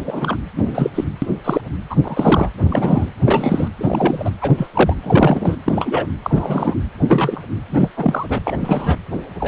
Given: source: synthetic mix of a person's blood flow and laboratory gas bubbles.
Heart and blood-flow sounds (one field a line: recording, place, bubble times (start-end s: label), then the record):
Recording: Doppler ultrasound of blood flow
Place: precordium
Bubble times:
0.05-0.36 s: bubbles
0.55-1.04 s: bubbles
1.22-1.28 s: bubbles
1.44-1.61 s: bubbles
1.90-1.96 s: bubbles
2.03-2.49 s: bubbles
2.58-3.08 s: bubbles
3.24-3.68 s: bubbles
3.77-4.30 s: bubbles
4.41-4.67 s: bubbles
4.72-4.97 s: bubbles
5.02-5.56 s: bubbles
5.66-6.06 s: bubbles
6.22-6.75 s: bubbles
7.08-7.42 s: bubbles
7.70-7.89 s: bubbles
7.96-8.39 s: bubbles
8.45-8.57 s: bubbles
8.61-8.96 s: bubbles
9.40-9.48 s: bubbles
From the record:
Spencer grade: 3 (all of the cardiac periods contain showers or single bubble signals, but not dominating or overriding the cardiac motion signals)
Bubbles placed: anywhere in the cardiac cycle